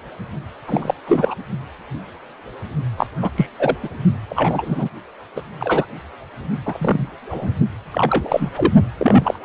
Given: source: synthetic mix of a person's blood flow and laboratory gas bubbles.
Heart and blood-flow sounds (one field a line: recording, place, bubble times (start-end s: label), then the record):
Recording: Doppler ultrasound of blood flow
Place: precordium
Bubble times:
0.67-0.94 s: bubbles
1.06-1.35 s: bubbles
2.97-3.07 s: bubbles
3.21-3.30 s: bubbles
3.36-3.47 s: bubbles
3.59-3.76 s: bubbles
3.83-3.88 s: bubbles
4.29-4.89 s: bubbles
5.36-5.42 s: bubbles
5.60-5.86 s: bubbles
6.66-7.08 s: bubbles
7.29-7.51 s: bubbles
7.92-8.50 s: bubbles
8.57-8.73 s: bubbles
8.99-9.39 s: bubbles
9.43-9.45 s: bubbles
From the record:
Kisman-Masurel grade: 233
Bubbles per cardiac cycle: several, 3 to 8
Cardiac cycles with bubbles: 50 to 99%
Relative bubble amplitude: loud (0.450 to 0.775)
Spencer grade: 3 (all of the cardiac periods contain showers or single bubble signals, but not dominating or overriding the cardiac motion signals)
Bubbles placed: only in the low amplitude regions of the cardiac cycle